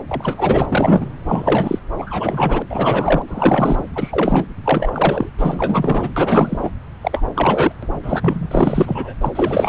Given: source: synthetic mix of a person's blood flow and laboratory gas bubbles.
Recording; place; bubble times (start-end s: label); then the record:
Doppler ultrasound of blood flow; subclavian vein
0.09-0.66 s: bubbles
0.69-1.06 s: bubbles
1.27-1.80 s: bubbles
1.99-2.62 s: bubbles
2.70-3.22 s: bubbles
3.28-3.87 s: bubbles
3.95-4.46 s: bubbles
4.64-5.29 s: bubbles
5.38-6.10 s: bubbles
6.16-6.71 s: bubbles
7.01-7.23 s: bubbles
7.35-7.72 s: bubbles
7.82-7.87 s: bubbles
8.03-8.48 s: bubbles
8.51-9.13 s: bubbles
9.21-9.32 s: bubbles
9.35-9.69 s: bubbles
From the record:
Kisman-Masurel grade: 343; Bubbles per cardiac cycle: rolling drumbeat, 9 or more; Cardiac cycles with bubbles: 100%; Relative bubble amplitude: loud (0.450 to 0.775); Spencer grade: 3 (all of the cardiac periods contain showers or single bubble signals, but not dominating or overriding the cardiac motion signals); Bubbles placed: anywhere in the cardiac cycle